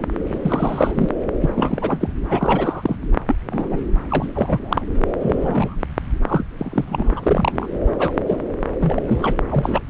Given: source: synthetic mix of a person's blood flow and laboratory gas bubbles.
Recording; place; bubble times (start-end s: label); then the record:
Doppler ultrasound of blood flow; subclavian vein
0.23-1.09 s: bubbles
1.42-1.50 s: bubbles
1.56-2.13 s: bubbles
2.28-2.96 s: bubbles
3.27-3.37 s: bubbles
3.52-3.79 s: bubbles
4.09-4.28 s: bubbles
4.33-4.81 s: bubbles
5.19-5.75 s: bubbles
6.28-6.42 s: bubbles
6.58-7.69 s: bubbles
7.99-8.12 s: bubbles
8.28-8.37 s: bubbles
8.79-9.37 s: bubbles
9.51-9.81 s: bubbles
From the record:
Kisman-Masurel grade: 242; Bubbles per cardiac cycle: several, 3 to 8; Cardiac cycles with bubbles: 100%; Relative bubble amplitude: moderate (0.250 to 0.450); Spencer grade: 3 (all of the cardiac periods contain showers or single bubble signals, but not dominating or overriding the cardiac motion signals); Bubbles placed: anywhere in the cardiac cycle